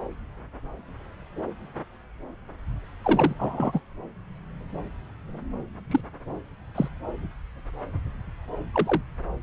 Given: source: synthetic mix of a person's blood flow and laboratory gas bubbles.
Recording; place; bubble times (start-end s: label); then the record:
Doppler ultrasound of blood flow; subclavian vein
3.02-3.35 s: bubbles
3.39-3.81 s: bubbles
5.91-6.00 s: bubbles
6.75-6.88 s: bubbles
8.73-9.02 s: bubbles
From the record:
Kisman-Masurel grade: 122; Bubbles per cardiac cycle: 1 to 2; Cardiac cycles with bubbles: 10 to 50%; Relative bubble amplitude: moderate (0.250 to 0.450); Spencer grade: 2 (many but less than half of the cardiac periods contain bubble signals, singularly or in groups); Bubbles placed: anywhere in the cardiac cycle